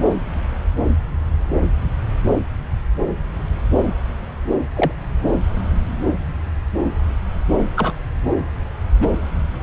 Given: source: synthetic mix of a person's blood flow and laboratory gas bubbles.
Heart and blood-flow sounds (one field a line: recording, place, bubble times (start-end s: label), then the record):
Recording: Doppler ultrasound of blood flow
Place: subclavian vein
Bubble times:
4.75-4.92 s: bubbles
7.76-7.92 s: bubbles
9.01-9.07 s: bubbles
From the record:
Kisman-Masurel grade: 123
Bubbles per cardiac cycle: 1 to 2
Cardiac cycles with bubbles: 10 to 50%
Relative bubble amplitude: loud (0.450 to 0.775)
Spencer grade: 2 (many but less than half of the cardiac periods contain bubble signals, singularly or in groups)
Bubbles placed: anywhere in the cardiac cycle